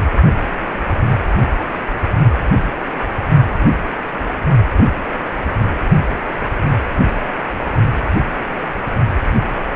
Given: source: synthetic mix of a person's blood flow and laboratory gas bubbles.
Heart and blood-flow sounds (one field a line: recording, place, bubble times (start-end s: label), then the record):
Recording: Doppler ultrasound of blood flow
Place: precordium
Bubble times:
4.76-4.84 s: bubbles
From the record:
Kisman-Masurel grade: 113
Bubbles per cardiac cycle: 1 to 2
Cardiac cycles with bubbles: 1 to 10%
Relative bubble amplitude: loud (0.450 to 0.775)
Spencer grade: 1 (occasional bubble signal discernible with the cardiac motion signal, with majority of cardiac periods free of bubbles)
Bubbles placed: only in the low amplitude regions of the cardiac cycle